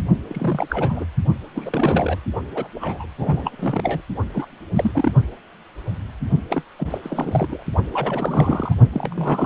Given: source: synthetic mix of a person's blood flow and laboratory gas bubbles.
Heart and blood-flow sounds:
Doppler ultrasound of blood flow; precordium
0.28-1.06 s: bubbles
1.55-2.20 s: bubbles
2.55-2.67 s: bubbles
2.75-3.08 s: bubbles
3.18-3.51 s: bubbles
3.59-4.01 s: bubbles
4.32-4.46 s: bubbles
4.76-4.91 s: bubbles
4.94-5.11 s: bubbles
6.50-6.62 s: bubbles
6.78-6.98 s: bubbles
7.03-7.62 s: bubbles
7.92-8.74 s: bubbles
8.92-9.45 s: bubbles
From the record:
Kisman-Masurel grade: 332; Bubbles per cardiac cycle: rolling drumbeat, 9 or more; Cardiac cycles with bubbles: 50 to 99%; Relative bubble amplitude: moderate (0.250 to 0.450); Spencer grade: 3 (all of the cardiac periods contain showers or single bubble signals, but not dominating or overriding the cardiac motion signals); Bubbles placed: only in the low amplitude regions of the cardiac cycle

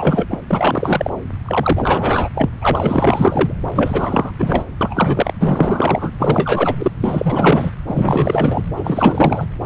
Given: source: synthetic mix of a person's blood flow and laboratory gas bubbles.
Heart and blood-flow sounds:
Doppler ultrasound of blood flow; subclavian vein
0.00-0.27 s: bubbles
0.30-0.39 s: bubbles
0.48-1.10 s: bubbles
1.45-2.29 s: bubbles
2.33-2.50 s: bubbles
2.61-3.52 s: bubbles
3.76-4.31 s: bubbles
4.38-4.65 s: bubbles
4.81-5.32 s: bubbles
5.38-6.12 s: bubbles
6.19-6.75 s: bubbles
6.79-6.92 s: bubbles
7.00-7.71 s: bubbles
7.86-8.62 s: bubbles
8.76-9.46 s: bubbles
From the record:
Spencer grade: 4 (maximum detectable bubble signal sounding continuously throughout systole and diastole of every cardiac period, and overriding the amplitude of the normal cardiac signals); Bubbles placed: anywhere in the cardiac cycle

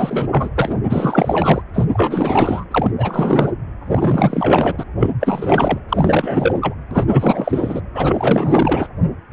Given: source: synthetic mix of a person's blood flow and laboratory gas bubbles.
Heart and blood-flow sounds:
Doppler ultrasound of blood flow; precordium
0.00-0.27 s: bubbles
0.31-0.50 s: bubbles
0.55-0.80 s: bubbles
0.89-1.62 s: bubbles
1.73-1.85 s: bubbles
1.93-2.65 s: bubbles
2.71-2.91 s: bubbles
2.98-3.52 s: bubbles
3.85-4.83 s: bubbles
4.98-5.11 s: bubbles
5.20-5.79 s: bubbles
5.88-6.74 s: bubbles
6.91-7.05 s: bubbles
7.09-7.81 s: bubbles
7.94-8.88 s: bubbles
From the record:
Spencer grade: 4 (maximum detectable bubble signal sounding continuously throughout systole and diastole of every cardiac period, and overriding the amplitude of the normal cardiac signals); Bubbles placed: anywhere in the cardiac cycle

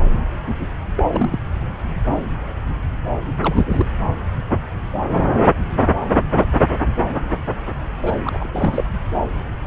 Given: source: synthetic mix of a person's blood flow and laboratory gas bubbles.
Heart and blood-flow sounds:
Doppler ultrasound of blood flow; subclavian vein
0.96-1.03 s: bubbles
1.10-1.39 s: bubbles
3.42-3.86 s: bubbles
8.02-8.47 s: bubbles
8.53-8.84 s: bubbles
From the record:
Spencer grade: 2 (many but less than half of the cardiac periods contain bubble signals, singularly or in groups); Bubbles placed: anywhere in the cardiac cycle

